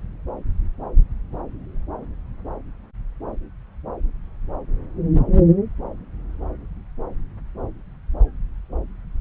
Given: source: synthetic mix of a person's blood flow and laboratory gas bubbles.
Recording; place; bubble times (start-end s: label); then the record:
Doppler ultrasound of blood flow; subclavian vein
no bubbles
From the record:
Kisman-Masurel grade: 000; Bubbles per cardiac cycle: 0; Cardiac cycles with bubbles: 0%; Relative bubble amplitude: no bubbles discernible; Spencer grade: 0 (complete lack of bubble signals)